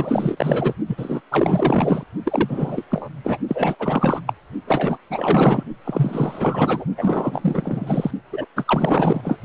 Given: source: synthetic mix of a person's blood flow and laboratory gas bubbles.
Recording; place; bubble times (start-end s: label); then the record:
Doppler ultrasound of blood flow; precordium
0.00-0.74 s: bubbles
0.87-1.21 s: bubbles
1.31-2.04 s: bubbles
2.25-2.85 s: bubbles
2.90-3.09 s: bubbles
3.23-3.38 s: bubbles
3.48-3.75 s: bubbles
3.79-4.21 s: bubbles
4.26-4.33 s: bubbles
4.67-4.97 s: bubbles
5.09-5.63 s: bubbles
5.84-6.85 s: bubbles
6.96-8.11 s: bubbles
8.32-8.46 s: bubbles
8.56-9.39 s: bubbles
From the record:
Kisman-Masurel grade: 444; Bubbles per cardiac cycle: continuous sound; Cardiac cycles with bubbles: 100%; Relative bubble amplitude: maximal (0.775 to 0.999); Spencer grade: 4 (maximum detectable bubble signal sounding continuously throughout systole and diastole of every cardiac period, and overriding the amplitude of the normal cardiac signals); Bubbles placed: only in the low amplitude regions of the cardiac cycle